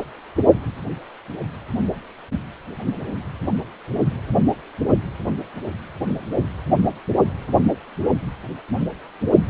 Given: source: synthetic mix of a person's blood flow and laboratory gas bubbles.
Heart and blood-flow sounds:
Doppler ultrasound of blood flow; precordium
no bubbles
From the record:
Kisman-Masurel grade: 000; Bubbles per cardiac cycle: 0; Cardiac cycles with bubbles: 0%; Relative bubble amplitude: no bubbles discernible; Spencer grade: 0 (complete lack of bubble signals)

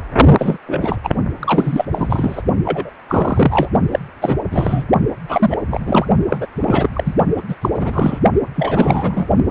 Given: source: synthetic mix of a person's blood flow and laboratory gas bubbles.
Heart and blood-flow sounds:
Doppler ultrasound of blood flow; precordium
0.38-0.58 s: bubbles
0.66-0.97 s: bubbles
1.03-1.09 s: bubbles
1.40-1.85 s: bubbles
1.92-2.42 s: bubbles
2.65-2.90 s: bubbles
3.08-3.69 s: bubbles
3.91-3.99 s: bubbles
4.21-4.36 s: bubbles
4.51-4.84 s: bubbles
5.28-5.57 s: bubbles
5.71-6.06 s: bubbles
6.29-6.46 s: bubbles
6.55-6.89 s: bubbles
6.93-7.14 s: bubbles
7.37-7.42 s: bubbles
7.49-7.55 s: bubbles
7.61-7.69 s: bubbles
7.74-8.19 s: bubbles
8.54-9.26 s: bubbles
From the record:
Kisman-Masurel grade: 343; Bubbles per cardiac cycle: rolling drumbeat, 9 or more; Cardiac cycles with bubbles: 100%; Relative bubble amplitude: loud (0.450 to 0.775); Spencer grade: 3 (all of the cardiac periods contain showers or single bubble signals, but not dominating or overriding the cardiac motion signals); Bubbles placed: only in the low amplitude regions of the cardiac cycle

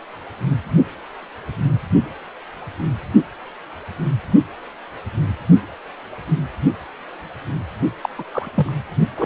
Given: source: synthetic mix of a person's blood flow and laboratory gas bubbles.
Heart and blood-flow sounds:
Doppler ultrasound of blood flow; precordium
8.02-8.09 s: bubbles
8.18-8.23 s: bubbles
8.31-8.48 s: bubbles
8.54-8.72 s: bubbles
9.17-9.26 s: bubbles
From the record:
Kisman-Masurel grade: 222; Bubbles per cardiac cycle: several, 3 to 8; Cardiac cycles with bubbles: 10 to 50%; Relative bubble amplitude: moderate (0.250 to 0.450); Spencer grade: 2 (many but less than half of the cardiac periods contain bubble signals, singularly or in groups); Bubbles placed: only in the low amplitude regions of the cardiac cycle

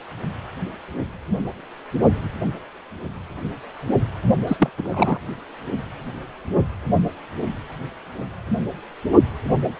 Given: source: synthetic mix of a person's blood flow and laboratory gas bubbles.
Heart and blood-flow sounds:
Doppler ultrasound of blood flow; precordium
4.47-4.70 s: bubbles
4.78-5.18 s: bubbles
From the record:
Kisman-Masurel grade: 212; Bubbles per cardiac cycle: several, 3 to 8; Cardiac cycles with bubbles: 1 to 10%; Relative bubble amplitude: moderate (0.250 to 0.450); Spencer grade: 1 (occasional bubble signal discernible with the cardiac motion signal, with majority of cardiac periods free of bubbles); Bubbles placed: only in the low amplitude regions of the cardiac cycle

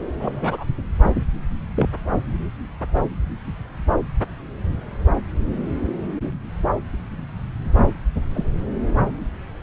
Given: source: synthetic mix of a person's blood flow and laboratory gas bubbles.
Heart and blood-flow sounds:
Doppler ultrasound of blood flow; subclavian vein
0.19-0.64 s: bubbles
1.76-1.88 s: bubbles
8.34-8.44 s: bubbles
From the record:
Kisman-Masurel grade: 122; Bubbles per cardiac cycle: 1 to 2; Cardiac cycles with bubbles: 10 to 50%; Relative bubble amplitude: moderate (0.250 to 0.450); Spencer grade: 2 (many but less than half of the cardiac periods contain bubble signals, singularly or in groups); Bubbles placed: anywhere in the cardiac cycle

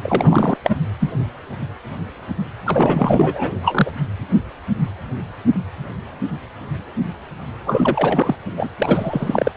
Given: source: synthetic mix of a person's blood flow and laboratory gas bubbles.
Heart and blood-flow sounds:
Doppler ultrasound of blood flow; precordium
0.03-0.57 s: bubbles
0.64-0.76 s: bubbles
0.99-1.11 s: bubbles
2.66-3.52 s: bubbles
3.63-3.90 s: bubbles
7.66-8.36 s: bubbles
8.57-8.70 s: bubbles
8.78-9.52 s: bubbles
From the record:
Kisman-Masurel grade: 333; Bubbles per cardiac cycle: rolling drumbeat, 9 or more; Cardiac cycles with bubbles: 50 to 99%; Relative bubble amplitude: loud (0.450 to 0.775); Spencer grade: 3 (all of the cardiac periods contain showers or single bubble signals, but not dominating or overriding the cardiac motion signals); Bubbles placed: anywhere in the cardiac cycle

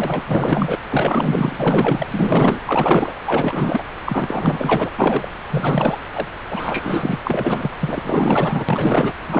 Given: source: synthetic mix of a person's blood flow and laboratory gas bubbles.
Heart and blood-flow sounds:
Doppler ultrasound of blood flow; subclavian vein
0.00-0.23 s: bubbles
0.27-0.79 s: bubbles
0.89-2.60 s: bubbles
2.67-3.13 s: bubbles
3.26-3.83 s: bubbles
4.05-4.91 s: bubbles
4.98-5.28 s: bubbles
5.50-5.98 s: bubbles
6.13-6.27 s: bubbles
6.50-7.19 s: bubbles
7.23-7.71 s: bubbles
7.80-8.65 s: bubbles
8.69-9.13 s: bubbles
9.26-9.40 s: bubbles
From the record:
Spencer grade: 4 (maximum detectable bubble signal sounding continuously throughout systole and diastole of every cardiac period, and overriding the amplitude of the normal cardiac signals); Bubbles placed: anywhere in the cardiac cycle

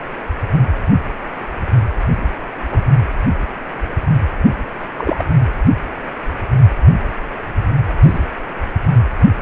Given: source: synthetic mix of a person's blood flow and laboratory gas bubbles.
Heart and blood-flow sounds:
Doppler ultrasound of blood flow; precordium
2.71-2.81 s: bubbles
4.97-5.24 s: bubbles
8.02-8.20 s: bubbles
From the record:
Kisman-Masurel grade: 122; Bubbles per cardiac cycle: 1 to 2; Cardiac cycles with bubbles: 10 to 50%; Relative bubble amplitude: moderate (0.250 to 0.450); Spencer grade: 2 (many but less than half of the cardiac periods contain bubble signals, singularly or in groups); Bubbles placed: anywhere in the cardiac cycle

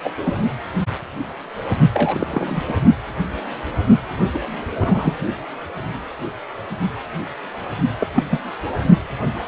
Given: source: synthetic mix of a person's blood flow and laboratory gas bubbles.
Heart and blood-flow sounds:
Doppler ultrasound of blood flow; precordium
0.03-0.10 s: bubbles
0.24-0.33 s: bubbles
1.94-2.27 s: bubbles
2.30-2.62 s: bubbles
2.68-2.73 s: bubbles
4.34-4.39 s: bubbles
4.79-5.16 s: bubbles
8.01-8.07 s: bubbles
8.16-8.23 s: bubbles
8.30-8.39 s: bubbles
From the record:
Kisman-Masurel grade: 222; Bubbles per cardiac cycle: several, 3 to 8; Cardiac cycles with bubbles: 10 to 50%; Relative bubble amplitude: moderate (0.250 to 0.450); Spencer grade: 2 (many but less than half of the cardiac periods contain bubble signals, singularly or in groups); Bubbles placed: only in the low amplitude regions of the cardiac cycle

